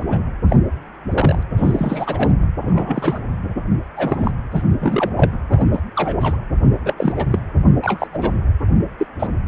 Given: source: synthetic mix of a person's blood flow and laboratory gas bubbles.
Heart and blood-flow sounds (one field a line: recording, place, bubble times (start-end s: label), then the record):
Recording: Doppler ultrasound of blood flow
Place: precordium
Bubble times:
0.00-0.05 s: bubbles
0.09-0.18 s: bubbles
0.48-0.56 s: bubbles
1.08-1.43 s: bubbles
1.57-2.30 s: bubbles
2.62-3.20 s: bubbles
3.96-4.31 s: bubbles
4.51-4.62 s: bubbles
4.80-5.14 s: bubbles
5.16-5.39 s: bubbles
5.49-5.66 s: bubbles
5.72-5.80 s: bubbles
5.96-6.38 s: bubbles
6.85-6.94 s: bubbles
6.97-7.12 s: bubbles
7.15-7.27 s: bubbles
7.31-7.40 s: bubbles
7.82-8.07 s: bubbles
8.12-8.34 s: bubbles
8.98-9.07 s: bubbles
9.20-9.27 s: bubbles
From the record:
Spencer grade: 3 (all of the cardiac periods contain showers or single bubble signals, but not dominating or overriding the cardiac motion signals)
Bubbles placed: anywhere in the cardiac cycle